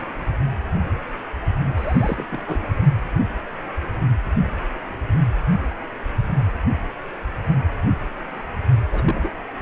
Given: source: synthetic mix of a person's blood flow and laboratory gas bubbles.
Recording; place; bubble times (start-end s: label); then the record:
Doppler ultrasound of blood flow; precordium
1.77-2.27 s: bubbles
2.30-2.73 s: bubbles
8.92-9.03 s: bubbles
9.06-9.30 s: bubbles
From the record:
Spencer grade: 2 (many but less than half of the cardiac periods contain bubble signals, singularly or in groups); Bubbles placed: anywhere in the cardiac cycle